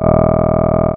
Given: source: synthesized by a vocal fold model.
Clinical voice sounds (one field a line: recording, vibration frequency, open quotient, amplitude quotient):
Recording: sustained vowel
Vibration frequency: 40 Hz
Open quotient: 0.2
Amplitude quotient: 1